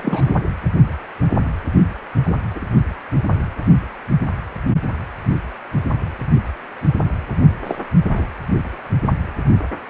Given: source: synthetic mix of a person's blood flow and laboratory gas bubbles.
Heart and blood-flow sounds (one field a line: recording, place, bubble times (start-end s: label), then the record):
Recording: Doppler ultrasound of blood flow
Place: precordium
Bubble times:
0.00-0.34 s: bubbles
2.24-2.35 s: bubbles
2.55-2.60 s: bubbles
7.61-7.81 s: bubbles
8.15-8.28 s: bubbles
From the record:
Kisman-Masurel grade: 122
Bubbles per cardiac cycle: 1 to 2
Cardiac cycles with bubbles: 10 to 50%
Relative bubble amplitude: moderate (0.250 to 0.450)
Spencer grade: 2 (many but less than half of the cardiac periods contain bubble signals, singularly or in groups)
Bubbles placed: only in the low amplitude regions of the cardiac cycle